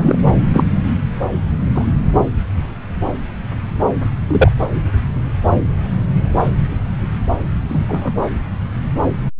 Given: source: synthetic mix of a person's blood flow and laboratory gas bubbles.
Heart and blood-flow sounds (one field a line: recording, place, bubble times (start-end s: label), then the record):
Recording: Doppler ultrasound of blood flow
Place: subclavian vein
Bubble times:
0.00-0.19 s: bubbles
0.54-0.65 s: bubbles
1.75-1.85 s: bubbles
4.27-4.51 s: bubbles
7.68-8.10 s: bubbles
From the record:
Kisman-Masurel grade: 123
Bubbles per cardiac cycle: 1 to 2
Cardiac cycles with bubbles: 10 to 50%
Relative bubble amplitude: loud (0.450 to 0.775)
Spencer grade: 2 (many but less than half of the cardiac periods contain bubble signals, singularly or in groups)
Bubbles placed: anywhere in the cardiac cycle